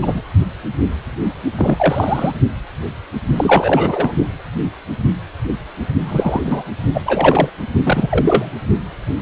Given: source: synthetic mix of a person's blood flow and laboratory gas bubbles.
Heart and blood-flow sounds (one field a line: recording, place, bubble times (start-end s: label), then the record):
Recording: Doppler ultrasound of blood flow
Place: precordium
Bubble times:
0.02-0.22 s: bubbles
1.57-2.32 s: bubbles
3.35-4.14 s: bubbles
6.05-6.63 s: bubbles
6.92-7.01 s: bubbles
7.05-7.49 s: bubbles
7.83-8.54 s: bubbles
From the record:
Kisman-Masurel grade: 223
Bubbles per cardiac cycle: several, 3 to 8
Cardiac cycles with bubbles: 10 to 50%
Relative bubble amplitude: loud (0.450 to 0.775)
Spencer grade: 2 (many but less than half of the cardiac periods contain bubble signals, singularly or in groups)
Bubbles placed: only in the low amplitude regions of the cardiac cycle